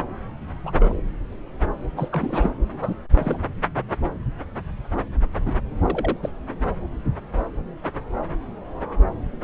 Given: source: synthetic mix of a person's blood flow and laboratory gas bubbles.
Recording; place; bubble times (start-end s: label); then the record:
Doppler ultrasound of blood flow; subclavian vein
0.65-0.72 s: bubbles
0.79-1.01 s: bubbles
1.96-2.54 s: bubbles
2.80-2.94 s: bubbles
3.13-3.39 s: bubbles
5.46-5.59 s: bubbles
5.82-6.17 s: bubbles
6.22-6.30 s: bubbles
From the record:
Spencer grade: 2 (many but less than half of the cardiac periods contain bubble signals, singularly or in groups); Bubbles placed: anywhere in the cardiac cycle